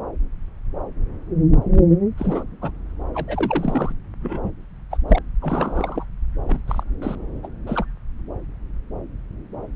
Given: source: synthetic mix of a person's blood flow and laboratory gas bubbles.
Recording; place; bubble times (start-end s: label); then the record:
Doppler ultrasound of blood flow; subclavian vein
2.18-2.44 s: bubbles
2.61-2.71 s: bubbles
3.14-3.92 s: bubbles
4.21-4.51 s: bubbles
4.90-4.98 s: bubbles
5.08-5.18 s: bubbles
5.41-6.04 s: bubbles
6.47-6.61 s: bubbles
6.67-6.83 s: bubbles
7.01-7.15 s: bubbles
7.43-7.47 s: bubbles
7.67-7.85 s: bubbles
From the record:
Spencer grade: 2 (many but less than half of the cardiac periods contain bubble signals, singularly or in groups); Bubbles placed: anywhere in the cardiac cycle